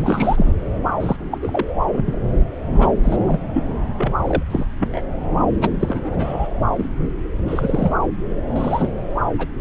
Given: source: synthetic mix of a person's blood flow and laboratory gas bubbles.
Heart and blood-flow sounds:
Doppler ultrasound of blood flow; subclavian vein
0.00-0.54 s: bubbles
1.00-1.16 s: bubbles
1.31-1.38 s: bubbles
1.42-1.65 s: bubbles
1.92-2.21 s: bubbles
2.75-2.92 s: bubbles
3.03-3.17 s: bubbles
3.27-3.42 s: bubbles
3.53-3.62 s: bubbles
3.98-4.12 s: bubbles
4.27-4.43 s: bubbles
4.49-4.66 s: bubbles
4.80-5.02 s: bubbles
5.57-5.76 s: bubbles
5.79-6.49 s: bubbles
6.77-6.89 s: bubbles
7.47-7.92 s: bubbles
8.55-8.92 s: bubbles
9.38-9.47 s: bubbles
From the record:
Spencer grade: 3 (all of the cardiac periods contain showers or single bubble signals, but not dominating or overriding the cardiac motion signals); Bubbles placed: anywhere in the cardiac cycle

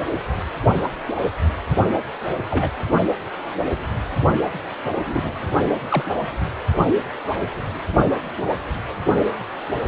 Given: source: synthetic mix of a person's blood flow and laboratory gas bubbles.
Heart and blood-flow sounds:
Doppler ultrasound of blood flow; precordium
2.50-2.71 s: bubbles
5.05-5.31 s: bubbles
5.89-6.04 s: bubbles
From the record:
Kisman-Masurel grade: 122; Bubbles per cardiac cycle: 1 to 2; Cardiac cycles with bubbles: 10 to 50%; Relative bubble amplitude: moderate (0.250 to 0.450); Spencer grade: 2 (many but less than half of the cardiac periods contain bubble signals, singularly or in groups); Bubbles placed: only in the low amplitude regions of the cardiac cycle

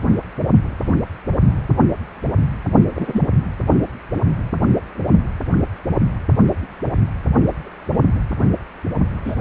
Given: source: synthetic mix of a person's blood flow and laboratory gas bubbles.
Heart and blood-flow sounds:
Doppler ultrasound of blood flow; precordium
2.95-3.22 s: bubbles
9.24-9.35 s: bubbles
From the record:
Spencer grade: 2 (many but less than half of the cardiac periods contain bubble signals, singularly or in groups); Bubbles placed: anywhere in the cardiac cycle

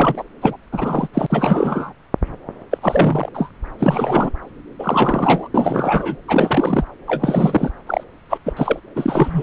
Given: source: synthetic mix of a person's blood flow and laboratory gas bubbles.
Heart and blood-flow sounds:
Doppler ultrasound of blood flow; subclavian vein
0.00-0.23 s: bubbles
0.42-0.57 s: bubbles
0.72-1.07 s: bubbles
1.14-1.27 s: bubbles
1.29-1.92 s: bubbles
2.71-2.78 s: bubbles
2.81-3.29 s: bubbles
3.34-3.50 s: bubbles
3.78-4.30 s: bubbles
4.79-5.48 s: bubbles
5.54-6.16 s: bubbles
6.28-6.84 s: bubbles
7.07-7.70 s: bubbles
7.87-8.04 s: bubbles
8.29-8.38 s: bubbles
8.46-8.53 s: bubbles
8.56-8.79 s: bubbles
8.96-9.43 s: bubbles
From the record:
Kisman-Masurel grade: 342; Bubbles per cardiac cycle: rolling drumbeat, 9 or more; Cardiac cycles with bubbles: 100%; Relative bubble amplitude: moderate (0.250 to 0.450); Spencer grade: 3 (all of the cardiac periods contain showers or single bubble signals, but not dominating or overriding the cardiac motion signals); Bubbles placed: anywhere in the cardiac cycle

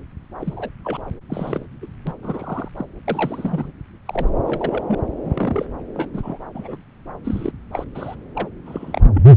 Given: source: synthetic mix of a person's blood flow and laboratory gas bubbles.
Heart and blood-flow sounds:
Doppler ultrasound of blood flow; subclavian vein
0.40-0.70 s: bubbles
0.83-1.01 s: bubbles
1.29-1.65 s: bubbles
1.81-1.86 s: bubbles
2.06-2.12 s: bubbles
2.23-2.69 s: bubbles
2.77-2.85 s: bubbles
3.08-3.71 s: bubbles
4.05-4.29 s: bubbles
4.46-4.84 s: bubbles
4.87-4.95 s: bubbles
5.22-5.66 s: bubbles
5.93-6.09 s: bubbles
6.13-6.38 s: bubbles
6.54-6.77 s: bubbles
7.25-7.51 s: bubbles
7.73-7.84 s: bubbles
7.94-8.16 s: bubbles
8.35-8.48 s: bubbles
8.66-9.02 s: bubbles
9.14-9.23 s: bubbles
From the record:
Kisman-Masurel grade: 242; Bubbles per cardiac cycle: several, 3 to 8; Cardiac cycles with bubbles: 100%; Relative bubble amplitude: moderate (0.250 to 0.450); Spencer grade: 3 (all of the cardiac periods contain showers or single bubble signals, but not dominating or overriding the cardiac motion signals); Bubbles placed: anywhere in the cardiac cycle

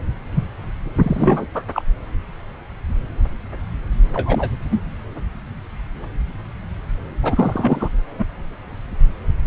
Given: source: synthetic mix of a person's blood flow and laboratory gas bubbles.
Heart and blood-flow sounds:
Doppler ultrasound of blood flow; subclavian vein
0.35-0.43 s: bubbles
0.98-1.47 s: bubbles
1.54-1.64 s: bubbles
1.74-1.82 s: bubbles
4.14-4.50 s: bubbles
4.70-4.82 s: bubbles
7.23-7.88 s: bubbles
8.18-8.25 s: bubbles
From the record:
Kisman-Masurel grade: 232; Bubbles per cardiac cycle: several, 3 to 8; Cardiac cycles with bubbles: 50 to 99%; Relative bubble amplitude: moderate (0.250 to 0.450); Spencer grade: 3 (all of the cardiac periods contain showers or single bubble signals, but not dominating or overriding the cardiac motion signals); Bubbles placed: anywhere in the cardiac cycle

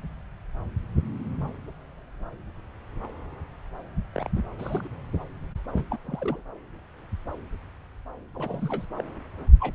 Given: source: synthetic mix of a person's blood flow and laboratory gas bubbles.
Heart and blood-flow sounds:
Doppler ultrasound of blood flow; subclavian vein
4.12-4.30 s: bubbles
4.35-4.40 s: bubbles
4.58-4.89 s: bubbles
5.75-5.85 s: bubbles
5.90-5.99 s: bubbles
6.02-6.42 s: bubbles
8.35-8.85 s: bubbles
8.97-9.04 s: bubbles
9.60-9.75 s: bubbles
From the record:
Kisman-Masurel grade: 221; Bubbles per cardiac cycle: several, 3 to 8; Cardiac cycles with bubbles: 10 to 50%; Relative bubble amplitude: barely perceptible (0.100 to 0.250); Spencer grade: 2 (many but less than half of the cardiac periods contain bubble signals, singularly or in groups); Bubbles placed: anywhere in the cardiac cycle

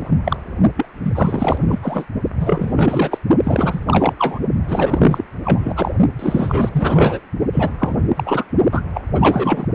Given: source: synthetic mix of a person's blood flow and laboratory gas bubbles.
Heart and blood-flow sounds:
Doppler ultrasound of blood flow; precordium
0.00-0.11 s: bubbles
0.24-0.36 s: bubbles
0.77-0.87 s: bubbles
1.02-1.79 s: bubbles
1.82-2.05 s: bubbles
2.39-3.21 s: bubbles
3.44-3.83 s: bubbles
3.86-4.15 s: bubbles
4.18-4.39 s: bubbles
4.68-5.24 s: bubbles
5.44-5.91 s: bubbles
6.19-6.70 s: bubbles
6.73-7.22 s: bubbles
7.52-7.75 s: bubbles
7.79-8.00 s: bubbles
8.16-8.44 s: bubbles
8.71-8.81 s: bubbles
8.93-9.02 s: bubbles
9.14-9.66 s: bubbles
From the record:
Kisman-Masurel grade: 444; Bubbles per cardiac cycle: continuous sound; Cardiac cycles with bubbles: 100%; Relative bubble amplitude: maximal (0.775 to 0.999); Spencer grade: 4 (maximum detectable bubble signal sounding continuously throughout systole and diastole of every cardiac period, and overriding the amplitude of the normal cardiac signals); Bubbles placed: only in the low amplitude regions of the cardiac cycle

